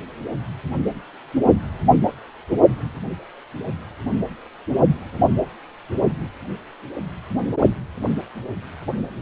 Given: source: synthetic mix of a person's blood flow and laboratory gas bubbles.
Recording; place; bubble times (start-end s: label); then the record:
Doppler ultrasound of blood flow; precordium
no bubbles
From the record:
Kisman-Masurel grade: 000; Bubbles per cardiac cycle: 0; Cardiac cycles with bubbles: 0%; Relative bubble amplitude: no bubbles discernible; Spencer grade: 0 (complete lack of bubble signals)